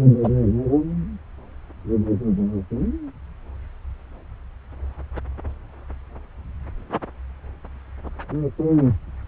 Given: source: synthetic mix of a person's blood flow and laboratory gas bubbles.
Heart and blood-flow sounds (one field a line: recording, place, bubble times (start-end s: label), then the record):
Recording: Doppler ultrasound of blood flow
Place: subclavian vein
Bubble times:
0.23-0.29 s: bubbles
From the record:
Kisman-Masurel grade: 113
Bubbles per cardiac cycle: 1 to 2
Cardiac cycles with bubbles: 1 to 10%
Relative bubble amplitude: loud (0.450 to 0.775)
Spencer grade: 1 (occasional bubble signal discernible with the cardiac motion signal, with majority of cardiac periods free of bubbles)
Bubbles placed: anywhere in the cardiac cycle